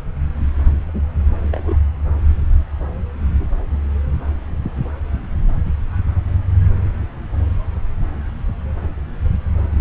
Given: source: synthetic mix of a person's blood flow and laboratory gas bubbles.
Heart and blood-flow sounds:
Doppler ultrasound of blood flow; subclavian vein
0.81-1.02 s: bubbles
1.52-1.76 s: bubbles
From the record:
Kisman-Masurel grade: 122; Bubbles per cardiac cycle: 1 to 2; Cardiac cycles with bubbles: 10 to 50%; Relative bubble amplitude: moderate (0.250 to 0.450); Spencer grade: 2 (many but less than half of the cardiac periods contain bubble signals, singularly or in groups); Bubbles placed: anywhere in the cardiac cycle

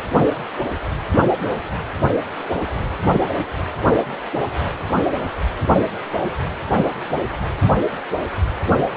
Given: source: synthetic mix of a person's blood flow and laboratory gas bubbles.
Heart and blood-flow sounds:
Doppler ultrasound of blood flow; precordium
no bubbles
From the record:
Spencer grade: 0 (complete lack of bubble signals)

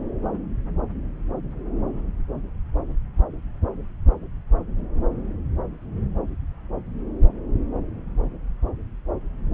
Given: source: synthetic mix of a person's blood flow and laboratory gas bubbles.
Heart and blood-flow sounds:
Doppler ultrasound of blood flow; subclavian vein
no bubbles
From the record:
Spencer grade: 0 (complete lack of bubble signals)

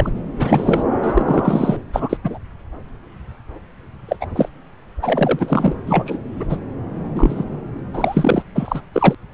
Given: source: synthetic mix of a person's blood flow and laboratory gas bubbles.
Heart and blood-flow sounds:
Doppler ultrasound of blood flow; subclavian vein
0.00-0.12 s: bubbles
0.37-0.82 s: bubbles
1.03-1.77 s: bubbles
1.93-2.17 s: bubbles
2.23-2.38 s: bubbles
4.08-4.16 s: bubbles
4.21-4.26 s: bubbles
4.36-4.49 s: bubbles
5.02-5.75 s: bubbles
5.86-6.19 s: bubbles
6.40-6.45 s: bubbles
6.49-6.57 s: bubbles
7.15-7.44 s: bubbles
7.93-8.44 s: bubbles
8.54-8.81 s: bubbles
8.93-9.15 s: bubbles
From the record:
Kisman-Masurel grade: 233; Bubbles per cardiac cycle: several, 3 to 8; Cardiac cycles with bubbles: 50 to 99%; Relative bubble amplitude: loud (0.450 to 0.775); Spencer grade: 3 (all of the cardiac periods contain showers or single bubble signals, but not dominating or overriding the cardiac motion signals); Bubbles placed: anywhere in the cardiac cycle

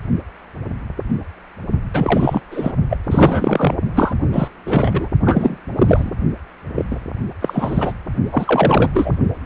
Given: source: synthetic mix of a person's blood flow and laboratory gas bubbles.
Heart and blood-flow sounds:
Doppler ultrasound of blood flow; precordium
1.93-2.41 s: bubbles
2.51-2.72 s: bubbles
2.90-2.98 s: bubbles
3.07-3.74 s: bubbles
3.95-4.13 s: bubbles
4.33-4.48 s: bubbles
4.66-5.09 s: bubbles
5.25-5.57 s: bubbles
5.78-6.12 s: bubbles
6.75-6.86 s: bubbles
6.91-7.00 s: bubbles
7.41-7.92 s: bubbles
8.31-8.90 s: bubbles
8.93-9.18 s: bubbles
From the record:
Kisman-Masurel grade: 333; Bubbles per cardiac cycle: rolling drumbeat, 9 or more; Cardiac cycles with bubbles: 50 to 99%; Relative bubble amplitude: loud (0.450 to 0.775); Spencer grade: 3 (all of the cardiac periods contain showers or single bubble signals, but not dominating or overriding the cardiac motion signals); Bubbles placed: only in the low amplitude regions of the cardiac cycle

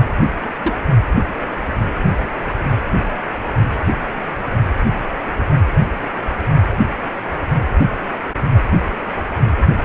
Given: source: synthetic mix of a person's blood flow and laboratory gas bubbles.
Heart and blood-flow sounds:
Doppler ultrasound of blood flow; precordium
0.42-0.50 s: bubbles
0.62-0.73 s: bubbles
From the record:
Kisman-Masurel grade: 112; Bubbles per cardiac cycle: 1 to 2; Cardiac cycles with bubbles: 1 to 10%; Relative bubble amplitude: moderate (0.250 to 0.450); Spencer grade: 1 (occasional bubble signal discernible with the cardiac motion signal, with majority of cardiac periods free of bubbles); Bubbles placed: only in the low amplitude regions of the cardiac cycle

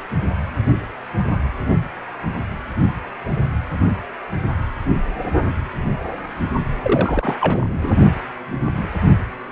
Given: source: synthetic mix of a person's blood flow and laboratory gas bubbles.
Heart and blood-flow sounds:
Doppler ultrasound of blood flow; precordium
6.82-7.37 s: bubbles
7.40-7.94 s: bubbles
From the record:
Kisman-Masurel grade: 212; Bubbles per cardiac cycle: several, 3 to 8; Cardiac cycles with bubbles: 1 to 10%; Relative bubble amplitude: moderate (0.250 to 0.450); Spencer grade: 1 (occasional bubble signal discernible with the cardiac motion signal, with majority of cardiac periods free of bubbles); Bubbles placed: only in the low amplitude regions of the cardiac cycle

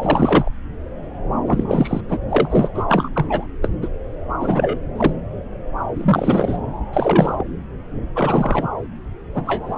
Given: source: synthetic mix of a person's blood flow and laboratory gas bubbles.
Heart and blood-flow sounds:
Doppler ultrasound of blood flow; subclavian vein
0.01-0.49 s: bubbles
1.47-2.01 s: bubbles
2.08-2.19 s: bubbles
2.29-2.69 s: bubbles
2.74-2.83 s: bubbles
2.88-3.09 s: bubbles
3.13-3.46 s: bubbles
3.61-3.69 s: bubbles
3.81-3.89 s: bubbles
4.39-4.79 s: bubbles
4.97-5.12 s: bubbles
5.95-6.58 s: bubbles
6.93-7.43 s: bubbles
8.15-8.68 s: bubbles
9.34-9.78 s: bubbles
From the record:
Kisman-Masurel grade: 233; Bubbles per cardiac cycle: several, 3 to 8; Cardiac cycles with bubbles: 50 to 99%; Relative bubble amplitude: loud (0.450 to 0.775); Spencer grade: 3 (all of the cardiac periods contain showers or single bubble signals, but not dominating or overriding the cardiac motion signals); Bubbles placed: anywhere in the cardiac cycle

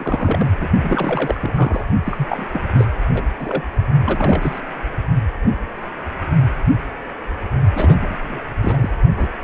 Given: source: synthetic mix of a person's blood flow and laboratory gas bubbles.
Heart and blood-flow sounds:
Doppler ultrasound of blood flow; precordium
0.00-0.48 s: bubbles
0.57-0.68 s: bubbles
0.81-1.86 s: bubbles
2.04-2.45 s: bubbles
2.53-2.60 s: bubbles
2.73-2.88 s: bubbles
3.14-3.22 s: bubbles
3.38-3.63 s: bubbles
4.04-4.62 s: bubbles
7.75-8.40 s: bubbles
8.62-8.90 s: bubbles
9.16-9.27 s: bubbles
From the record:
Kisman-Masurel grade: 332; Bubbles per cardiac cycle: rolling drumbeat, 9 or more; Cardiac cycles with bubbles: 50 to 99%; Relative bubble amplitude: moderate (0.250 to 0.450); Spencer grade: 3 (all of the cardiac periods contain showers or single bubble signals, but not dominating or overriding the cardiac motion signals); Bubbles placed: only in the low amplitude regions of the cardiac cycle

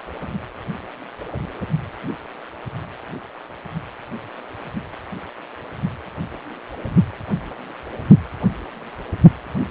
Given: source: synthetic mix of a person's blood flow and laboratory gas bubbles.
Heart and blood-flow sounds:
Doppler ultrasound of blood flow; precordium
no bubbles
From the record:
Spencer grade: 0 (complete lack of bubble signals)

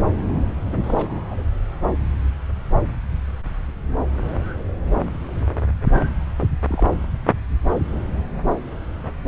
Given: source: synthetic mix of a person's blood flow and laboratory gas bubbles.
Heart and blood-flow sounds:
Doppler ultrasound of blood flow; subclavian vein
0.66-0.77 s: bubbles
0.83-1.45 s: bubbles
6.38-6.46 s: bubbles
6.68-6.86 s: bubbles
From the record:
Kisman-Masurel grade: 221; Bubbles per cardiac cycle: several, 3 to 8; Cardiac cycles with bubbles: 10 to 50%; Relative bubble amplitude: barely perceptible (0.100 to 0.250); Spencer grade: 2 (many but less than half of the cardiac periods contain bubble signals, singularly or in groups); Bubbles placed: anywhere in the cardiac cycle

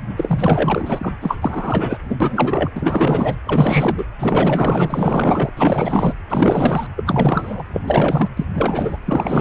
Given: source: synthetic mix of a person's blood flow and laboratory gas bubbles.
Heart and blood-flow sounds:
Doppler ultrasound of blood flow; precordium
0.16-1.13 s: bubbles
1.21-1.39 s: bubbles
1.42-1.97 s: bubbles
2.09-2.70 s: bubbles
2.75-3.38 s: bubbles
3.45-4.04 s: bubbles
4.19-5.50 s: bubbles
5.55-6.13 s: bubbles
6.29-6.87 s: bubbles
6.96-7.64 s: bubbles
7.73-8.29 s: bubbles
8.37-8.46 s: bubbles
8.54-8.98 s: bubbles
9.06-9.41 s: bubbles
From the record:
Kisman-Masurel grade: 444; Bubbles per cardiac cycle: continuous sound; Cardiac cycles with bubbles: 100%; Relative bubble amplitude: maximal (0.775 to 0.999); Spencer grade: 4 (maximum detectable bubble signal sounding continuously throughout systole and diastole of every cardiac period, and overriding the amplitude of the normal cardiac signals); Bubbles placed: anywhere in the cardiac cycle

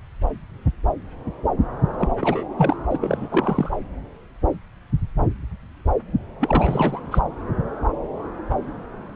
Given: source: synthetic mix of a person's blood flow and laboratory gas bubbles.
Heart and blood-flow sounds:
Doppler ultrasound of blood flow; subclavian vein
1.99-2.08 s: bubbles
2.19-2.44 s: bubbles
2.57-2.76 s: bubbles
2.90-2.98 s: bubbles
3.00-3.71 s: bubbles
6.40-7.00 s: bubbles
7.11-7.20 s: bubbles
From the record:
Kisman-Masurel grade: 222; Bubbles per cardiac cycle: several, 3 to 8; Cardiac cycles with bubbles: 10 to 50%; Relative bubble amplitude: moderate (0.250 to 0.450); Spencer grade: 2 (many but less than half of the cardiac periods contain bubble signals, singularly or in groups); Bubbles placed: anywhere in the cardiac cycle

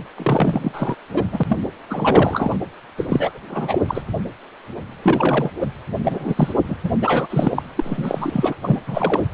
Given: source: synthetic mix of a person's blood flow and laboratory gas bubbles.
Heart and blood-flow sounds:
Doppler ultrasound of blood flow; precordium
0.18-0.96 s: bubbles
1.14-1.23 s: bubbles
1.31-1.44 s: bubbles
1.49-1.56 s: bubbles
1.89-2.59 s: bubbles
2.98-3.32 s: bubbles
3.35-3.39 s: bubbles
3.49-3.79 s: bubbles
3.88-4.01 s: bubbles
5.03-5.50 s: bubbles
5.60-5.71 s: bubbles
6.04-6.54 s: bubbles
6.67-6.76 s: bubbles
6.83-6.91 s: bubbles
7.01-7.63 s: bubbles
7.75-8.55 s: bubbles
8.63-8.80 s: bubbles
8.86-9.26 s: bubbles
From the record:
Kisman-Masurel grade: 332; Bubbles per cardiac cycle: rolling drumbeat, 9 or more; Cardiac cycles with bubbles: 50 to 99%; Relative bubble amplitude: moderate (0.250 to 0.450); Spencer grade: 3 (all of the cardiac periods contain showers or single bubble signals, but not dominating or overriding the cardiac motion signals); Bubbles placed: anywhere in the cardiac cycle

